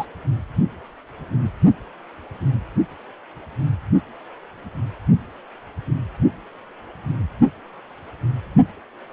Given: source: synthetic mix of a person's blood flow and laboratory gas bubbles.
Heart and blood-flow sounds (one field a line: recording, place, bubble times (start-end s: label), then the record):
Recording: Doppler ultrasound of blood flow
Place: precordium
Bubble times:
0.00-0.05 s: bubbles
From the record:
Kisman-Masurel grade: 113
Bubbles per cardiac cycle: 1 to 2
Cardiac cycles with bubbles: 1 to 10%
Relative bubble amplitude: loud (0.450 to 0.775)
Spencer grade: 1 (occasional bubble signal discernible with the cardiac motion signal, with majority of cardiac periods free of bubbles)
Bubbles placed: only in the low amplitude regions of the cardiac cycle